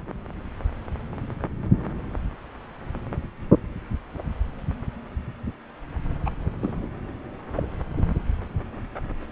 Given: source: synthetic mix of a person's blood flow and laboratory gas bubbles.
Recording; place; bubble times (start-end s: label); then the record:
Doppler ultrasound of blood flow; subclavian vein
6.25-6.31 s: bubbles
6.62-6.88 s: bubbles
7.57-7.68 s: bubbles
From the record:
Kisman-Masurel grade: 112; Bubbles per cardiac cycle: 1 to 2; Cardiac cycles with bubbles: 1 to 10%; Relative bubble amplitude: moderate (0.250 to 0.450); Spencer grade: 1 (occasional bubble signal discernible with the cardiac motion signal, with majority of cardiac periods free of bubbles); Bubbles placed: anywhere in the cardiac cycle